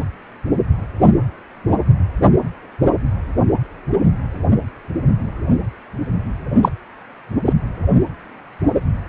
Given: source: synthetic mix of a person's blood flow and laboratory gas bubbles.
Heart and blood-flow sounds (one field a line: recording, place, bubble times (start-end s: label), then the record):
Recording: Doppler ultrasound of blood flow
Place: precordium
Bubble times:
6.62-6.69 s: bubbles
7.45-7.53 s: bubbles
From the record:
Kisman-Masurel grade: 113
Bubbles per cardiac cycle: 1 to 2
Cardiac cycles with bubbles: 1 to 10%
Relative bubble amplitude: loud (0.450 to 0.775)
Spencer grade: 1 (occasional bubble signal discernible with the cardiac motion signal, with majority of cardiac periods free of bubbles)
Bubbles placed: only in the low amplitude regions of the cardiac cycle